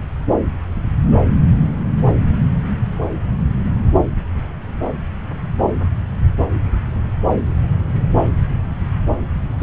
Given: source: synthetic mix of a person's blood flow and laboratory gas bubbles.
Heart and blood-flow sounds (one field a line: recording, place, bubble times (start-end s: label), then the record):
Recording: Doppler ultrasound of blood flow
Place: subclavian vein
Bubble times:
9.60-9.63 s: bubbles
From the record:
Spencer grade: 1 (occasional bubble signal discernible with the cardiac motion signal, with majority of cardiac periods free of bubbles)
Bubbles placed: anywhere in the cardiac cycle